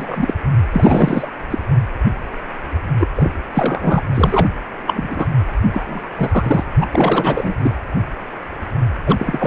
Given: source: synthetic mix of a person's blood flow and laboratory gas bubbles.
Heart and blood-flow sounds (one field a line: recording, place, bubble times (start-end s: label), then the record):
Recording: Doppler ultrasound of blood flow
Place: precordium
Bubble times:
0.00-0.34 s: bubbles
0.72-1.28 s: bubbles
1.50-1.58 s: bubbles
2.98-3.08 s: bubbles
3.15-3.32 s: bubbles
3.54-4.03 s: bubbles
4.14-4.47 s: bubbles
4.87-5.26 s: bubbles
5.72-6.09 s: bubbles
6.17-6.63 s: bubbles
6.81-6.87 s: bubbles
6.92-7.54 s: bubbles
7.59-7.75 s: bubbles
9.06-9.47 s: bubbles
From the record:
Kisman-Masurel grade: 333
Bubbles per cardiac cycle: rolling drumbeat, 9 or more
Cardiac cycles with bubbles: 50 to 99%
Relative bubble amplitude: loud (0.450 to 0.775)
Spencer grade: 3 (all of the cardiac periods contain showers or single bubble signals, but not dominating or overriding the cardiac motion signals)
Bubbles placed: anywhere in the cardiac cycle